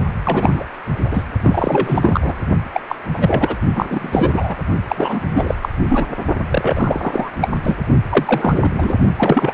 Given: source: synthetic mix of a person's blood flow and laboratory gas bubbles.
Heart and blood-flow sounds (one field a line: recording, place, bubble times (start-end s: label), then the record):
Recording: Doppler ultrasound of blood flow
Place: precordium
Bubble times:
0.24-0.64 s: bubbles
1.00-1.25 s: bubbles
1.44-2.46 s: bubbles
2.73-2.80 s: bubbles
2.88-2.96 s: bubbles
3.13-3.55 s: bubbles
3.75-4.57 s: bubbles
4.88-5.21 s: bubbles
5.30-5.54 s: bubbles
5.61-5.69 s: bubbles
5.89-6.06 s: bubbles
6.49-7.31 s: bubbles
7.41-7.48 s: bubbles
7.64-7.78 s: bubbles
8.10-8.98 s: bubbles
9.16-9.54 s: bubbles
From the record:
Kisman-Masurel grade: 343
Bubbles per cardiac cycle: rolling drumbeat, 9 or more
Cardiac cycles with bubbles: 100%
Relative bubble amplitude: loud (0.450 to 0.775)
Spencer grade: 3 (all of the cardiac periods contain showers or single bubble signals, but not dominating or overriding the cardiac motion signals)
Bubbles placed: only in the low amplitude regions of the cardiac cycle